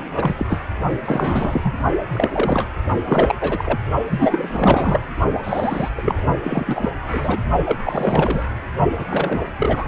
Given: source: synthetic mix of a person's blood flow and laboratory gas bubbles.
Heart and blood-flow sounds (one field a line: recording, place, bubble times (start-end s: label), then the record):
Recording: Doppler ultrasound of blood flow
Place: precordium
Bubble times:
0.00-0.11 s: bubbles
0.17-0.35 s: bubbles
0.38-0.60 s: bubbles
1.05-1.74 s: bubbles
2.12-2.69 s: bubbles
3.06-3.35 s: bubbles
3.41-3.79 s: bubbles
4.09-5.00 s: bubbles
5.43-5.89 s: bubbles
5.97-6.14 s: bubbles
6.43-6.89 s: bubbles
7.08-7.38 s: bubbles
7.65-7.77 s: bubbles
7.83-8.45 s: bubbles
8.98-9.41 s: bubbles
9.59-9.88 s: bubbles
From the record:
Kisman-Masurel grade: 343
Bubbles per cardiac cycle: rolling drumbeat, 9 or more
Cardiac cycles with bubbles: 100%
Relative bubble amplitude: loud (0.450 to 0.775)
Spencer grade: 3 (all of the cardiac periods contain showers or single bubble signals, but not dominating or overriding the cardiac motion signals)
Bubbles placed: only in the low amplitude regions of the cardiac cycle